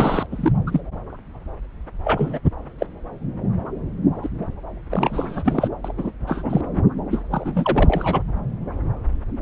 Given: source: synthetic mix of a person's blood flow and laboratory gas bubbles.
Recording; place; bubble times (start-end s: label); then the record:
Doppler ultrasound of blood flow; subclavian vein
0.00-0.26 s: bubbles
0.31-0.52 s: bubbles
0.67-0.80 s: bubbles
2.04-2.39 s: bubbles
2.79-2.87 s: bubbles
4.22-4.29 s: bubbles
4.89-5.68 s: bubbles
5.84-5.92 s: bubbles
5.97-6.12 s: bubbles
6.27-6.61 s: bubbles
7.10-7.21 s: bubbles
7.30-8.22 s: bubbles
From the record:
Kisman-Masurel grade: 232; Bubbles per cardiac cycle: several, 3 to 8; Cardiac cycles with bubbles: 50 to 99%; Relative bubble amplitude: moderate (0.250 to 0.450); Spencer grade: 3 (all of the cardiac periods contain showers or single bubble signals, but not dominating or overriding the cardiac motion signals); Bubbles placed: anywhere in the cardiac cycle